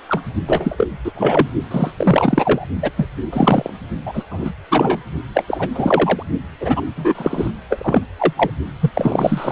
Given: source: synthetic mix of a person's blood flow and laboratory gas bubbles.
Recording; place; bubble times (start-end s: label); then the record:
Doppler ultrasound of blood flow; precordium
0.09-0.21 s: bubbles
0.46-0.88 s: bubbles
1.04-1.12 s: bubbles
1.15-1.48 s: bubbles
1.71-1.91 s: bubbles
1.97-2.67 s: bubbles
2.82-2.91 s: bubbles
2.96-3.08 s: bubbles
3.32-3.70 s: bubbles
4.05-4.24 s: bubbles
4.30-4.50 s: bubbles
4.68-4.99 s: bubbles
5.34-5.44 s: bubbles
5.47-5.68 s: bubbles
5.75-6.23 s: bubbles
6.60-6.81 s: bubbles
6.96-7.50 s: bubbles
7.70-8.04 s: bubbles
8.18-8.50 s: bubbles
8.80-8.91 s: bubbles
8.95-9.52 s: bubbles
From the record:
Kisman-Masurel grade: 343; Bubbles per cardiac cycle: rolling drumbeat, 9 or more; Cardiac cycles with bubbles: 100%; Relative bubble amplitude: loud (0.450 to 0.775); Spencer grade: 3 (all of the cardiac periods contain showers or single bubble signals, but not dominating or overriding the cardiac motion signals); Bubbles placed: only in the low amplitude regions of the cardiac cycle